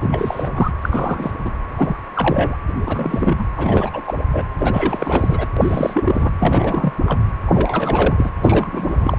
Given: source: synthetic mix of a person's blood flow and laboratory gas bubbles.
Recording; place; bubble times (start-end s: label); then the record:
Doppler ultrasound of blood flow; precordium
0.01-0.50 s: bubbles
0.55-0.72 s: bubbles
0.81-1.32 s: bubbles
1.44-1.50 s: bubbles
1.76-1.96 s: bubbles
2.15-2.57 s: bubbles
2.85-3.47 s: bubbles
3.56-3.90 s: bubbles
3.93-4.01 s: bubbles
4.04-4.14 s: bubbles
4.33-4.45 s: bubbles
4.58-5.47 s: bubbles
5.56-6.30 s: bubbles
6.39-6.93 s: bubbles
7.06-7.18 s: bubbles
7.46-8.30 s: bubbles
8.43-9.19 s: bubbles
From the record:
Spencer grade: 3 (all of the cardiac periods contain showers or single bubble signals, but not dominating or overriding the cardiac motion signals); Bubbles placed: anywhere in the cardiac cycle